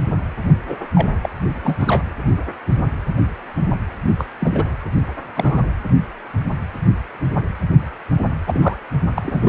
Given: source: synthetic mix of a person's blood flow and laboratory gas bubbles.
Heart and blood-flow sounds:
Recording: Doppler ultrasound of blood flow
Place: precordium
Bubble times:
0.69-0.77 s: bubbles
0.95-1.08 s: bubbles
1.22-1.30 s: bubbles
1.64-1.75 s: bubbles
1.79-2.04 s: bubbles
4.18-4.25 s: bubbles
4.40-4.67 s: bubbles
5.35-5.63 s: bubbles
8.47-8.77 s: bubbles
9.14-9.49 s: bubbles
From the record:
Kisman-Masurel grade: 232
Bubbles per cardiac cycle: several, 3 to 8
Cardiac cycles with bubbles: 50 to 99%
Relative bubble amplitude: moderate (0.250 to 0.450)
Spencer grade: 3 (all of the cardiac periods contain showers or single bubble signals, but not dominating or overriding the cardiac motion signals)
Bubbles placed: only in the low amplitude regions of the cardiac cycle

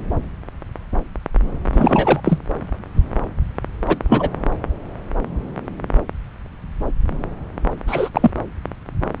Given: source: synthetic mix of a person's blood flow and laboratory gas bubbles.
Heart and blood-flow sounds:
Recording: Doppler ultrasound of blood flow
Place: subclavian vein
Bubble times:
1.73-2.21 s: bubbles
2.23-2.39 s: bubbles
3.87-3.98 s: bubbles
4.09-4.29 s: bubbles
7.87-8.09 s: bubbles
8.14-8.30 s: bubbles
From the record:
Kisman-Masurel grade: 223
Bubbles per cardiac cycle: several, 3 to 8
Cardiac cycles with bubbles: 10 to 50%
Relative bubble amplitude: loud (0.450 to 0.775)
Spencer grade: 2 (many but less than half of the cardiac periods contain bubble signals, singularly or in groups)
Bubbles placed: anywhere in the cardiac cycle

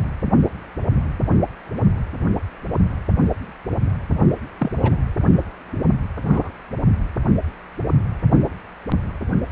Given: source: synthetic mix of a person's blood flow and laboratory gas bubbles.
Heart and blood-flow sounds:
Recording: Doppler ultrasound of blood flow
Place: precordium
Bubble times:
4.58-4.71 s: bubbles
4.83-4.96 s: bubbles
6.25-6.52 s: bubbles
From the record:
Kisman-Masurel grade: 122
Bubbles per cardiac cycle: 1 to 2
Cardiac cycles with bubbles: 10 to 50%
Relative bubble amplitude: moderate (0.250 to 0.450)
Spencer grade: 2 (many but less than half of the cardiac periods contain bubble signals, singularly or in groups)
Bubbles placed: anywhere in the cardiac cycle

